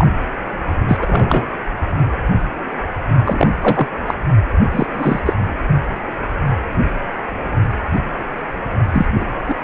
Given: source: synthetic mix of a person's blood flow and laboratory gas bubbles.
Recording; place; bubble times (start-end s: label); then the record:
Doppler ultrasound of blood flow; precordium
0.00-0.07 s: bubbles
0.88-1.46 s: bubbles
3.25-3.49 s: bubbles
3.61-3.87 s: bubbles
4.07-4.14 s: bubbles
4.71-4.87 s: bubbles
4.94-5.20 s: bubbles
5.25-5.33 s: bubbles
8.92-9.05 s: bubbles
9.16-9.25 s: bubbles
9.47-9.55 s: bubbles
From the record:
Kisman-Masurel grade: 223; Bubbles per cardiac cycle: several, 3 to 8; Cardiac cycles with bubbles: 10 to 50%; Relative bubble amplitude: loud (0.450 to 0.775); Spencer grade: 2 (many but less than half of the cardiac periods contain bubble signals, singularly or in groups); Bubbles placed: only in the low amplitude regions of the cardiac cycle